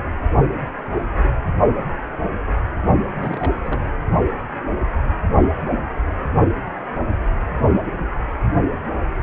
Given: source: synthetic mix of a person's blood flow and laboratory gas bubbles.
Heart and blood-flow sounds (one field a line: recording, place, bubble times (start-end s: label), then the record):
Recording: Doppler ultrasound of blood flow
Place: precordium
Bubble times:
3.17-3.55 s: bubbles
3.63-3.88 s: bubbles
From the record:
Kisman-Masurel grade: 221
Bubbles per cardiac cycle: several, 3 to 8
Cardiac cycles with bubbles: 10 to 50%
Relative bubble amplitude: barely perceptible (0.100 to 0.250)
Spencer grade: 2 (many but less than half of the cardiac periods contain bubble signals, singularly or in groups)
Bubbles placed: only in the low amplitude regions of the cardiac cycle